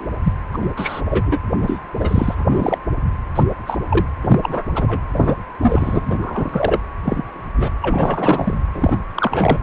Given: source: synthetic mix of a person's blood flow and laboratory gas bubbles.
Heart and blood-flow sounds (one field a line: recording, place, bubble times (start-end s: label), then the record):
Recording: Doppler ultrasound of blood flow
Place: precordium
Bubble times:
0.00-0.09 s: bubbles
0.23-0.33 s: bubbles
0.52-0.58 s: bubbles
0.61-0.68 s: bubbles
0.76-1.01 s: bubbles
1.10-1.23 s: bubbles
1.25-1.38 s: bubbles
1.60-1.80 s: bubbles
1.99-2.78 s: bubbles
3.35-3.43 s: bubbles
3.67-3.77 s: bubbles
3.89-4.05 s: bubbles
4.21-4.40 s: bubbles
4.42-4.64 s: bubbles
4.75-5.00 s: bubbles
5.12-5.35 s: bubbles
5.61-6.02 s: bubbles
6.05-6.79 s: bubbles
7.03-7.42 s: bubbles
7.59-7.72 s: bubbles
7.81-8.57 s: bubbles
8.72-9.02 s: bubbles
9.14-9.58 s: bubbles
From the record:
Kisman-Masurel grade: 233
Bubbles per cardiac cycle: several, 3 to 8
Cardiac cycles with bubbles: 50 to 99%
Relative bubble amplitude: loud (0.450 to 0.775)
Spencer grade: 3 (all of the cardiac periods contain showers or single bubble signals, but not dominating or overriding the cardiac motion signals)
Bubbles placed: anywhere in the cardiac cycle